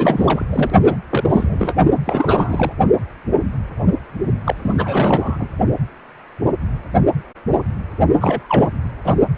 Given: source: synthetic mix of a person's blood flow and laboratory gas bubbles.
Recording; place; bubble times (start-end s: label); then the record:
Doppler ultrasound of blood flow; precordium
0.00-0.44 s: bubbles
0.49-0.70 s: bubbles
0.83-0.96 s: bubbles
1.09-1.74 s: bubbles
2.06-2.73 s: bubbles
4.44-5.48 s: bubbles
8.21-8.70 s: bubbles
9.04-9.16 s: bubbles
From the record:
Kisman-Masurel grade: 332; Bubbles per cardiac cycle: rolling drumbeat, 9 or more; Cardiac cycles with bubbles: 50 to 99%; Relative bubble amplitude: moderate (0.250 to 0.450); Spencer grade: 3 (all of the cardiac periods contain showers or single bubble signals, but not dominating or overriding the cardiac motion signals); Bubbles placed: only in the low amplitude regions of the cardiac cycle